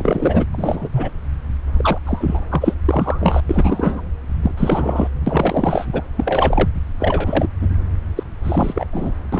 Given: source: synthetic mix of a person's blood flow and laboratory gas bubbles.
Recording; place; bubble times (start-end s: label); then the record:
Doppler ultrasound of blood flow; subclavian vein
0.00-0.46 s: bubbles
0.54-0.88 s: bubbles
0.92-1.10 s: bubbles
1.77-1.98 s: bubbles
2.05-2.44 s: bubbles
2.50-2.74 s: bubbles
2.88-3.42 s: bubbles
3.49-4.01 s: bubbles
4.42-4.51 s: bubbles
4.57-5.08 s: bubbles
5.26-5.86 s: bubbles
5.92-6.02 s: bubbles
6.17-6.69 s: bubbles
7.00-7.47 s: bubbles
7.61-7.76 s: bubbles
8.16-8.24 s: bubbles
8.44-8.86 s: bubbles
8.92-9.12 s: bubbles
9.33-9.40 s: bubbles
From the record:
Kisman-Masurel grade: 343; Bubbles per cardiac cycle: rolling drumbeat, 9 or more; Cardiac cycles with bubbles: 100%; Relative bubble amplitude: loud (0.450 to 0.775); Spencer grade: 3 (all of the cardiac periods contain showers or single bubble signals, but not dominating or overriding the cardiac motion signals); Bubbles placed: anywhere in the cardiac cycle